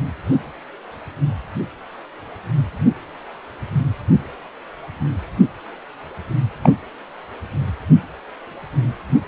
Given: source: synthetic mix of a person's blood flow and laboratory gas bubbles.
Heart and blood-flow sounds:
Doppler ultrasound of blood flow; precordium
6.62-6.75 s: bubbles
From the record:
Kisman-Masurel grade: 112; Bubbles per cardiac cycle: 1 to 2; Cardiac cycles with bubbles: 1 to 10%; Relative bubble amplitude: moderate (0.250 to 0.450); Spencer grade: 1 (occasional bubble signal discernible with the cardiac motion signal, with majority of cardiac periods free of bubbles); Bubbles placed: anywhere in the cardiac cycle

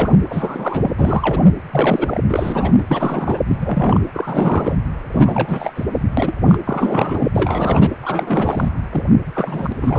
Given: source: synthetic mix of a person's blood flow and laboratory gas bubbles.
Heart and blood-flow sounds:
Doppler ultrasound of blood flow; precordium
0.00-0.14 s: bubbles
0.29-0.93 s: bubbles
0.97-1.43 s: bubbles
1.71-2.21 s: bubbles
2.29-2.83 s: bubbles
2.88-3.41 s: bubbles
3.47-3.56 s: bubbles
3.60-4.01 s: bubbles
4.13-4.75 s: bubbles
5.12-5.71 s: bubbles
5.75-5.85 s: bubbles
5.94-6.00 s: bubbles
6.17-6.33 s: bubbles
6.46-6.58 s: bubbles
6.64-7.29 s: bubbles
7.35-7.89 s: bubbles
8.02-8.69 s: bubbles
8.92-9.07 s: bubbles
9.34-9.72 s: bubbles
9.80-9.99 s: bubbles
From the record:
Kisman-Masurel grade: 343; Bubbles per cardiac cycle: rolling drumbeat, 9 or more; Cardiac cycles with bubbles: 100%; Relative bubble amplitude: loud (0.450 to 0.775); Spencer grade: 3 (all of the cardiac periods contain showers or single bubble signals, but not dominating or overriding the cardiac motion signals); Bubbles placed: anywhere in the cardiac cycle

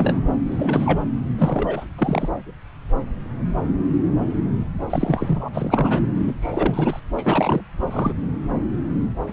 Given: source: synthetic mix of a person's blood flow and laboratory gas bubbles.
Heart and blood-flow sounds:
Doppler ultrasound of blood flow; subclavian vein
0.00-0.21 s: bubbles
0.49-1.01 s: bubbles
1.38-1.85 s: bubbles
1.98-2.29 s: bubbles
4.90-5.49 s: bubbles
5.53-6.00 s: bubbles
6.26-6.33 s: bubbles
6.41-7.00 s: bubbles
7.16-7.62 s: bubbles
7.86-8.13 s: bubbles
From the record:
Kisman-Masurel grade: 333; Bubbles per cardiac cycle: rolling drumbeat, 9 or more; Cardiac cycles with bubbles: 50 to 99%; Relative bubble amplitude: loud (0.450 to 0.775); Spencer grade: 3 (all of the cardiac periods contain showers or single bubble signals, but not dominating or overriding the cardiac motion signals); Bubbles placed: anywhere in the cardiac cycle

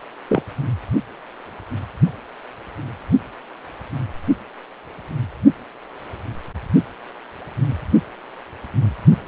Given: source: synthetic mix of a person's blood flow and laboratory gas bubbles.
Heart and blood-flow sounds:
Doppler ultrasound of blood flow; precordium
0.27-0.42 s: bubbles
From the record:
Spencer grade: 2 (many but less than half of the cardiac periods contain bubble signals, singularly or in groups); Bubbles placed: only in the low amplitude regions of the cardiac cycle

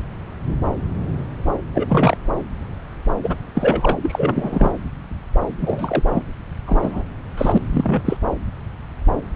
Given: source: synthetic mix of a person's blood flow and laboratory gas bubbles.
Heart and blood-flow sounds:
Doppler ultrasound of blood flow; subclavian vein
1.73-2.16 s: bubbles
3.23-3.37 s: bubbles
3.54-3.97 s: bubbles
4.02-4.71 s: bubbles
5.61-6.02 s: bubbles
6.12-6.22 s: bubbles
6.67-7.07 s: bubbles
7.37-7.58 s: bubbles
7.69-8.01 s: bubbles
8.04-8.17 s: bubbles
From the record:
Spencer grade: 2 (many but less than half of the cardiac periods contain bubble signals, singularly or in groups); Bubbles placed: anywhere in the cardiac cycle

